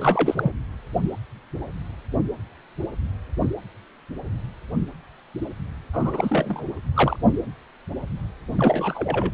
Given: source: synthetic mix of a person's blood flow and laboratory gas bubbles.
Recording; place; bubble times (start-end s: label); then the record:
Doppler ultrasound of blood flow; precordium
0.00-0.52 s: bubbles
5.93-6.65 s: bubbles
6.94-7.17 s: bubbles
8.55-9.32 s: bubbles
From the record:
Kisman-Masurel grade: 222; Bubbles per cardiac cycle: several, 3 to 8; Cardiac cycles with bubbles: 10 to 50%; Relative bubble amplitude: moderate (0.250 to 0.450); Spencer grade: 2 (many but less than half of the cardiac periods contain bubble signals, singularly or in groups); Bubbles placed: anywhere in the cardiac cycle